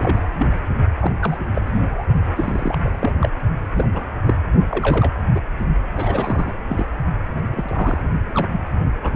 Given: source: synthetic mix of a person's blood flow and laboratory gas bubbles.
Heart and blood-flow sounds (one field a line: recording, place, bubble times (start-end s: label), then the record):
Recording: Doppler ultrasound of blood flow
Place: precordium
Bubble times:
0.00-0.21 s: bubbles
0.38-0.47 s: bubbles
0.99-1.12 s: bubbles
1.21-1.38 s: bubbles
1.54-1.62 s: bubbles
1.66-2.06 s: bubbles
2.36-2.81 s: bubbles
2.83-3.12 s: bubbles
3.21-3.30 s: bubbles
3.75-3.88 s: bubbles
3.94-4.03 s: bubbles
4.24-4.35 s: bubbles
4.69-5.11 s: bubbles
5.34-5.40 s: bubbles
5.95-6.54 s: bubbles
6.68-6.86 s: bubbles
7.34-7.40 s: bubbles
7.50-8.01 s: bubbles
8.26-8.47 s: bubbles
9.02-9.16 s: bubbles
From the record:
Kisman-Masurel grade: 232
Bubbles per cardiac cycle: several, 3 to 8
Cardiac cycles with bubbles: 50 to 99%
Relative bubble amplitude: moderate (0.250 to 0.450)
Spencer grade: 3 (all of the cardiac periods contain showers or single bubble signals, but not dominating or overriding the cardiac motion signals)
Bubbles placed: only in the low amplitude regions of the cardiac cycle